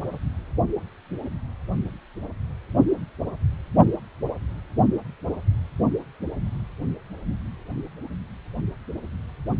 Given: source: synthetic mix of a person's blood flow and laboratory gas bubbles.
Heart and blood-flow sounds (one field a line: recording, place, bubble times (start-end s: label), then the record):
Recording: Doppler ultrasound of blood flow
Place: precordium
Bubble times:
no bubbles
From the record:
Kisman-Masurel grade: 000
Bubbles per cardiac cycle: 0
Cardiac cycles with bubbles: 0%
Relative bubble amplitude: no bubbles discernible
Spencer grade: 0 (complete lack of bubble signals)